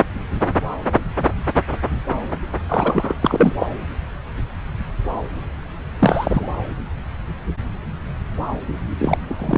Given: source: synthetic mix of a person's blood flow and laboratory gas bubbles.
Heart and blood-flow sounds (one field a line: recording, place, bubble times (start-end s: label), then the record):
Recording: Doppler ultrasound of blood flow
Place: subclavian vein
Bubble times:
2.69-3.15 s: bubbles
3.22-3.53 s: bubbles
3.56-3.67 s: bubbles
5.99-6.48 s: bubbles
8.99-9.18 s: bubbles
9.29-9.35 s: bubbles
9.38-9.58 s: bubbles
From the record:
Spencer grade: 2 (many but less than half of the cardiac periods contain bubble signals, singularly or in groups)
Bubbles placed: anywhere in the cardiac cycle